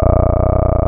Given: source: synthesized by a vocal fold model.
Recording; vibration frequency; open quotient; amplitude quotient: sustained vowel; 30 Hz; 0.3; 1